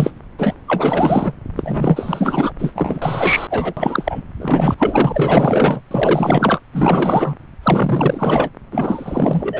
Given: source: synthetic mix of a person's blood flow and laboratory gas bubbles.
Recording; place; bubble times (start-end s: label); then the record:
Doppler ultrasound of blood flow; subclavian vein
0.00-0.11 s: bubbles
0.38-0.55 s: bubbles
0.68-1.34 s: bubbles
1.56-2.52 s: bubbles
2.58-2.71 s: bubbles
2.75-3.47 s: bubbles
3.50-3.74 s: bubbles
3.77-4.21 s: bubbles
4.39-4.75 s: bubbles
4.77-5.81 s: bubbles
5.91-6.59 s: bubbles
6.73-7.37 s: bubbles
7.63-8.50 s: bubbles
8.71-9.60 s: bubbles
From the record:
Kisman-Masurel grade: 444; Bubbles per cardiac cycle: continuous sound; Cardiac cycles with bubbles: 100%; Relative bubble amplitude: maximal (0.775 to 0.999); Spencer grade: 4 (maximum detectable bubble signal sounding continuously throughout systole and diastole of every cardiac period, and overriding the amplitude of the normal cardiac signals); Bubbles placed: anywhere in the cardiac cycle